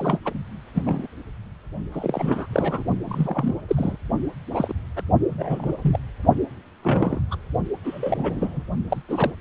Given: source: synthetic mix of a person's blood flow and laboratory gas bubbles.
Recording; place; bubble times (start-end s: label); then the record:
Doppler ultrasound of blood flow; precordium
0.00-0.18 s: bubbles
0.25-0.34 s: bubbles
0.75-0.81 s: bubbles
0.85-1.07 s: bubbles
1.92-2.46 s: bubbles
2.52-2.83 s: bubbles
3.05-3.54 s: bubbles
3.68-3.97 s: bubbles
4.53-4.73 s: bubbles
4.96-5.03 s: bubbles
5.29-5.74 s: bubbles
5.83-6.00 s: bubbles
6.83-7.20 s: bubbles
7.31-7.37 s: bubbles
7.83-8.63 s: bubbles
8.90-9.02 s: bubbles
9.08-9.32 s: bubbles
From the record:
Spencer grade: 3 (all of the cardiac periods contain showers or single bubble signals, but not dominating or overriding the cardiac motion signals); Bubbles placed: only in the low amplitude regions of the cardiac cycle